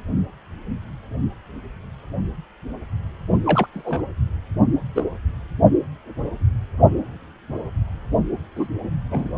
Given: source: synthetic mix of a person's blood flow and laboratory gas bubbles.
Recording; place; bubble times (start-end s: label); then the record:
Doppler ultrasound of blood flow; precordium
3.46-3.67 s: bubbles
3.73-4.02 s: bubbles
4.95-5.03 s: bubbles
8.56-8.68 s: bubbles
9.11-9.32 s: bubbles
From the record:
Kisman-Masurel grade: 122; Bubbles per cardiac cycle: 1 to 2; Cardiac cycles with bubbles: 10 to 50%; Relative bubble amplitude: moderate (0.250 to 0.450); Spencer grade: 2 (many but less than half of the cardiac periods contain bubble signals, singularly or in groups); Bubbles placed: only in the low amplitude regions of the cardiac cycle